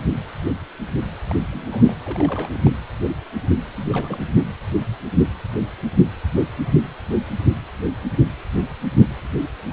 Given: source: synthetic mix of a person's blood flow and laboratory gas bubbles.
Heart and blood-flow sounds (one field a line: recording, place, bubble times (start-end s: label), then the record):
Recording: Doppler ultrasound of blood flow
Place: precordium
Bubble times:
1.25-1.42 s: bubbles
1.50-1.94 s: bubbles
2.04-2.69 s: bubbles
3.73-4.43 s: bubbles
4.45-4.53 s: bubbles
From the record:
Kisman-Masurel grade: 221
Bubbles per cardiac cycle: several, 3 to 8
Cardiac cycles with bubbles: 10 to 50%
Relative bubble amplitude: barely perceptible (0.100 to 0.250)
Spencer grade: 2 (many but less than half of the cardiac periods contain bubble signals, singularly or in groups)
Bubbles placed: anywhere in the cardiac cycle